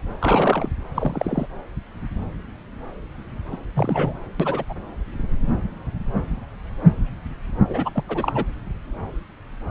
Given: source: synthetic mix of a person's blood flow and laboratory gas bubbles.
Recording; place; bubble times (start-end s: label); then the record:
Doppler ultrasound of blood flow; subclavian vein
0.20-0.68 s: bubbles
0.94-1.47 s: bubbles
3.52-3.57 s: bubbles
3.75-4.13 s: bubbles
4.39-4.63 s: bubbles
4.69-4.74 s: bubbles
7.69-7.89 s: bubbles
7.95-8.03 s: bubbles
8.08-8.44 s: bubbles
From the record:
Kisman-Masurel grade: 222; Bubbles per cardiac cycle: several, 3 to 8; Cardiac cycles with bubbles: 10 to 50%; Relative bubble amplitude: moderate (0.250 to 0.450); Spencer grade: 2 (many but less than half of the cardiac periods contain bubble signals, singularly or in groups); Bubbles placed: anywhere in the cardiac cycle